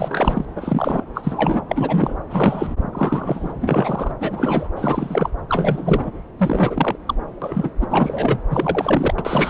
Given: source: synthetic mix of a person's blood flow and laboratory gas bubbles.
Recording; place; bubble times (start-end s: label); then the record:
Doppler ultrasound of blood flow; subclavian vein
0.00-0.45 s: bubbles
0.56-1.02 s: bubbles
1.15-1.62 s: bubbles
1.68-2.15 s: bubbles
2.29-2.74 s: bubbles
2.93-3.54 s: bubbles
3.61-4.12 s: bubbles
4.20-4.70 s: bubbles
4.76-5.30 s: bubbles
5.49-6.11 s: bubbles
6.38-6.96 s: bubbles
7.07-7.15 s: bubbles
7.42-7.71 s: bubbles
7.80-7.87 s: bubbles
7.90-8.38 s: bubbles
8.50-9.14 s: bubbles
9.18-9.50 s: bubbles
From the record:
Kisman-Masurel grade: 343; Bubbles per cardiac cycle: rolling drumbeat, 9 or more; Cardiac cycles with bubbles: 100%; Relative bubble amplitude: loud (0.450 to 0.775); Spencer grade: 3 (all of the cardiac periods contain showers or single bubble signals, but not dominating or overriding the cardiac motion signals); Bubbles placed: anywhere in the cardiac cycle